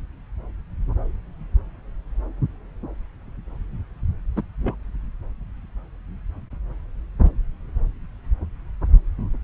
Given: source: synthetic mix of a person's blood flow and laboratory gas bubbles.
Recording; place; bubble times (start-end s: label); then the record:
Doppler ultrasound of blood flow; subclavian vein
4.36-4.42 s: bubbles
4.62-4.75 s: bubbles
From the record:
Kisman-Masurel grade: 112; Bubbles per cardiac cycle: 1 to 2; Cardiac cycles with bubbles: 1 to 10%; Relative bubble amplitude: moderate (0.250 to 0.450); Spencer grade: 1 (occasional bubble signal discernible with the cardiac motion signal, with majority of cardiac periods free of bubbles); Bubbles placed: anywhere in the cardiac cycle